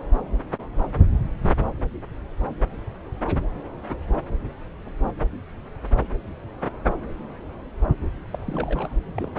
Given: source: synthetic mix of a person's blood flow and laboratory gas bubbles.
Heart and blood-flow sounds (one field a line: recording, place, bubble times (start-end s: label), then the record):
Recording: Doppler ultrasound of blood flow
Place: subclavian vein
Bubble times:
8.32-8.93 s: bubbles
9.16-9.39 s: bubbles
From the record:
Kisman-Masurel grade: 211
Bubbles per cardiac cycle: several, 3 to 8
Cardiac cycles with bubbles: 1 to 10%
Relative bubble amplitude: barely perceptible (0.100 to 0.250)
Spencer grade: 1 (occasional bubble signal discernible with the cardiac motion signal, with majority of cardiac periods free of bubbles)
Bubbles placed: anywhere in the cardiac cycle